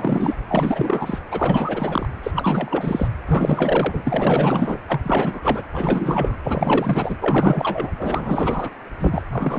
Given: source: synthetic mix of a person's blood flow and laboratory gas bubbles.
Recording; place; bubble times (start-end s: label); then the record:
Doppler ultrasound of blood flow; precordium
0.00-0.35 s: bubbles
0.48-1.19 s: bubbles
1.31-2.08 s: bubbles
2.22-2.31 s: bubbles
2.34-3.08 s: bubbles
3.26-4.02 s: bubbles
4.04-4.78 s: bubbles
4.88-5.00 s: bubbles
5.03-5.62 s: bubbles
5.72-6.37 s: bubbles
6.43-7.17 s: bubbles
7.21-7.91 s: bubbles
7.98-8.71 s: bubbles
8.99-9.23 s: bubbles
9.31-9.59 s: bubbles
From the record:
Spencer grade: 4 (maximum detectable bubble signal sounding continuously throughout systole and diastole of every cardiac period, and overriding the amplitude of the normal cardiac signals); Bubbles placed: anywhere in the cardiac cycle